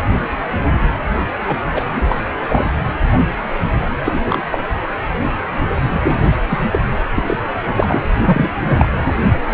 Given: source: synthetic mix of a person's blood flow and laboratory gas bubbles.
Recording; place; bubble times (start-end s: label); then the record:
Doppler ultrasound of blood flow; precordium
1.47-1.58 s: bubbles
1.75-1.85 s: bubbles
1.87-2.19 s: bubbles
2.48-2.69 s: bubbles
4.04-4.21 s: bubbles
4.26-4.43 s: bubbles
4.51-4.58 s: bubbles
6.04-6.19 s: bubbles
6.50-6.62 s: bubbles
6.71-6.79 s: bubbles
7.14-7.23 s: bubbles
7.27-7.44 s: bubbles
7.63-8.02 s: bubbles
8.25-8.51 s: bubbles
8.60-8.89 s: bubbles
9.49-9.54 s: bubbles
From the record:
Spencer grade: 3 (all of the cardiac periods contain showers or single bubble signals, but not dominating or overriding the cardiac motion signals); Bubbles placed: anywhere in the cardiac cycle